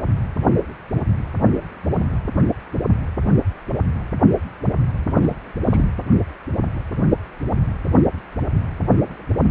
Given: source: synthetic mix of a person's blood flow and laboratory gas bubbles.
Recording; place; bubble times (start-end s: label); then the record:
Doppler ultrasound of blood flow; precordium
5.22-5.36 s: bubbles
5.64-5.84 s: bubbles
From the record:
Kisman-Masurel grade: 112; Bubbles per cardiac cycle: 1 to 2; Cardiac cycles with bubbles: 1 to 10%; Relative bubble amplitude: moderate (0.250 to 0.450); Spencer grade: 1 (occasional bubble signal discernible with the cardiac motion signal, with majority of cardiac periods free of bubbles); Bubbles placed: anywhere in the cardiac cycle